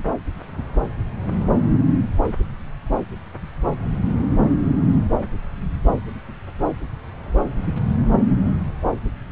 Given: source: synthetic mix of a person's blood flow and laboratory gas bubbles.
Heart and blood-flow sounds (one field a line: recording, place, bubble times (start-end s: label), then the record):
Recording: Doppler ultrasound of blood flow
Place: subclavian vein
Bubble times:
no bubbles
From the record:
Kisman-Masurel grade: 000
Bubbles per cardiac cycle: 0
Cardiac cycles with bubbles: 0%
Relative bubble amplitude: no bubbles discernible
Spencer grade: 0 (complete lack of bubble signals)